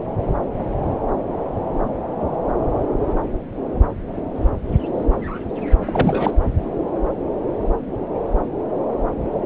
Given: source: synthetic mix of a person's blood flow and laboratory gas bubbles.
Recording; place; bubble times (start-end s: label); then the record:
Doppler ultrasound of blood flow; subclavian vein
5.85-6.36 s: bubbles
From the record:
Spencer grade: 1 (occasional bubble signal discernible with the cardiac motion signal, with majority of cardiac periods free of bubbles); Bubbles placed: anywhere in the cardiac cycle